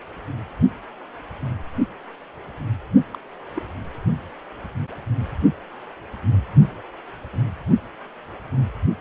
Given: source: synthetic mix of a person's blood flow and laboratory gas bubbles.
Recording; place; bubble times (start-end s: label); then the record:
Doppler ultrasound of blood flow; precordium
3.14-3.18 s: bubbles
3.57-3.62 s: bubbles
From the record:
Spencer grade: 2 (many but less than half of the cardiac periods contain bubble signals, singularly or in groups); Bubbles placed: only in the low amplitude regions of the cardiac cycle